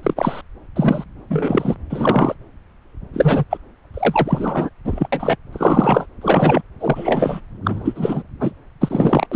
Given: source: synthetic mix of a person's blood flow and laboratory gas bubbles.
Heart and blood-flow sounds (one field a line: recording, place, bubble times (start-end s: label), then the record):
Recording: Doppler ultrasound of blood flow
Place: subclavian vein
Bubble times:
0.03-0.41 s: bubbles
0.76-1.04 s: bubbles
1.30-1.75 s: bubbles
1.90-2.34 s: bubbles
3.13-3.44 s: bubbles
3.50-3.57 s: bubbles
3.94-4.70 s: bubbles
4.85-5.08 s: bubbles
5.12-5.36 s: bubbles
5.53-6.06 s: bubbles
6.21-6.62 s: bubbles
6.80-7.41 s: bubbles
7.64-8.22 s: bubbles
8.39-8.51 s: bubbles
8.80-9.27 s: bubbles
9.31-9.36 s: bubbles
From the record:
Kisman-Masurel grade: 233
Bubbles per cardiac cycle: several, 3 to 8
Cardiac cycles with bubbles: 50 to 99%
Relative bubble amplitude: loud (0.450 to 0.775)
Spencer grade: 3 (all of the cardiac periods contain showers or single bubble signals, but not dominating or overriding the cardiac motion signals)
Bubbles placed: anywhere in the cardiac cycle